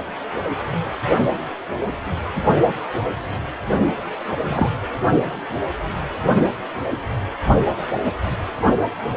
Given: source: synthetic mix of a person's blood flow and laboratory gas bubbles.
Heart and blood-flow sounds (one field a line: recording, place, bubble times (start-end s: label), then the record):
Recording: Doppler ultrasound of blood flow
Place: precordium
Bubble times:
4.47-4.71 s: bubbles
From the record:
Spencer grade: 1 (occasional bubble signal discernible with the cardiac motion signal, with majority of cardiac periods free of bubbles)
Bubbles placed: only in the low amplitude regions of the cardiac cycle